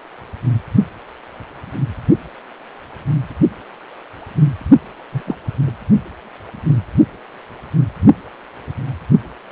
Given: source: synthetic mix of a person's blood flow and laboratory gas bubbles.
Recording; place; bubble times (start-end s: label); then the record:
Doppler ultrasound of blood flow; precordium
5.12-5.37 s: bubbles
5.67-5.71 s: bubbles
From the record:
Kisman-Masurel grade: 212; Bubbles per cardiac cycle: several, 3 to 8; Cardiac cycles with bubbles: 1 to 10%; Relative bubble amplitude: moderate (0.250 to 0.450); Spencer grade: 1 (occasional bubble signal discernible with the cardiac motion signal, with majority of cardiac periods free of bubbles); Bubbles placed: only in the low amplitude regions of the cardiac cycle